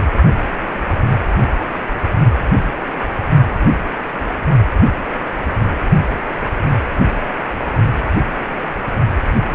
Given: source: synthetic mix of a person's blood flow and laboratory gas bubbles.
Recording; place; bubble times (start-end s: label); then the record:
Doppler ultrasound of blood flow; precordium
9.49-9.55 s: bubbles
From the record:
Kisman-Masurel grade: 111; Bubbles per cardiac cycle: 1 to 2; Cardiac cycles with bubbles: 1 to 10%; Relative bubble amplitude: barely perceptible (0.100 to 0.250); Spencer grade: 1 (occasional bubble signal discernible with the cardiac motion signal, with majority of cardiac periods free of bubbles); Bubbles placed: anywhere in the cardiac cycle